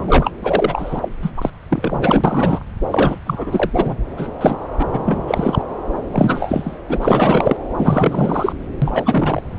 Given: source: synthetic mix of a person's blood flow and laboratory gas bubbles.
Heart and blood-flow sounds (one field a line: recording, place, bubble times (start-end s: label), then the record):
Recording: Doppler ultrasound of blood flow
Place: subclavian vein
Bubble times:
0.00-0.31 s: bubbles
0.43-1.09 s: bubbles
1.22-1.31 s: bubbles
1.37-1.50 s: bubbles
1.70-2.60 s: bubbles
2.87-3.18 s: bubbles
3.26-3.70 s: bubbles
3.74-3.97 s: bubbles
4.17-4.28 s: bubbles
4.41-4.57 s: bubbles
4.79-4.86 s: bubbles
4.92-5.21 s: bubbles
5.27-5.64 s: bubbles
6.11-6.77 s: bubbles
6.88-7.57 s: bubbles
7.77-8.52 s: bubbles
8.81-9.41 s: bubbles
From the record:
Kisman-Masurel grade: 343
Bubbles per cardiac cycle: rolling drumbeat, 9 or more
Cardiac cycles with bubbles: 100%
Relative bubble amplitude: loud (0.450 to 0.775)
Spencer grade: 3 (all of the cardiac periods contain showers or single bubble signals, but not dominating or overriding the cardiac motion signals)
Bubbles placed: anywhere in the cardiac cycle